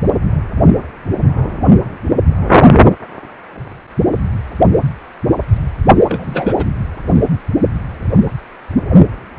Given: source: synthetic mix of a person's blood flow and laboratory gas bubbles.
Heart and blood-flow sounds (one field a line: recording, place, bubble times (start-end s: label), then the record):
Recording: Doppler ultrasound of blood flow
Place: precordium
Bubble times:
5.99-6.05 s: bubbles
6.08-6.54 s: bubbles
6.56-6.66 s: bubbles
From the record:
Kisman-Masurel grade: 212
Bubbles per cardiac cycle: several, 3 to 8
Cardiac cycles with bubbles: 1 to 10%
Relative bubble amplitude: moderate (0.250 to 0.450)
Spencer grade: 1 (occasional bubble signal discernible with the cardiac motion signal, with majority of cardiac periods free of bubbles)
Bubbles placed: anywhere in the cardiac cycle